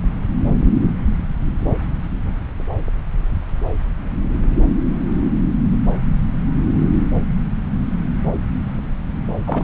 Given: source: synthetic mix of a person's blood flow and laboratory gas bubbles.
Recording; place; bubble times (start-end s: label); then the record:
Doppler ultrasound of blood flow; subclavian vein
9.46-9.64 s: bubbles
From the record:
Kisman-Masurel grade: 212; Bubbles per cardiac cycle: several, 3 to 8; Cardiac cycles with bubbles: 1 to 10%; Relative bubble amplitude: moderate (0.250 to 0.450); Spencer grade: 1 (occasional bubble signal discernible with the cardiac motion signal, with majority of cardiac periods free of bubbles); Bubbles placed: anywhere in the cardiac cycle